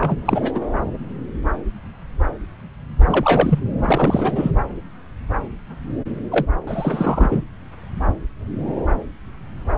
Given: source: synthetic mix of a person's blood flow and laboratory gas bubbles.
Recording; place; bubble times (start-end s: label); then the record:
Doppler ultrasound of blood flow; subclavian vein
0.01-0.17 s: bubbles
0.25-0.52 s: bubbles
0.54-0.60 s: bubbles
3.07-3.60 s: bubbles
3.82-4.51 s: bubbles
6.31-6.46 s: bubbles
6.67-7.44 s: bubbles
From the record:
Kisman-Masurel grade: 222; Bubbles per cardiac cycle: several, 3 to 8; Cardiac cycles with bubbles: 10 to 50%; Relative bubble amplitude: moderate (0.250 to 0.450); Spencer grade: 2 (many but less than half of the cardiac periods contain bubble signals, singularly or in groups); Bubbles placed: anywhere in the cardiac cycle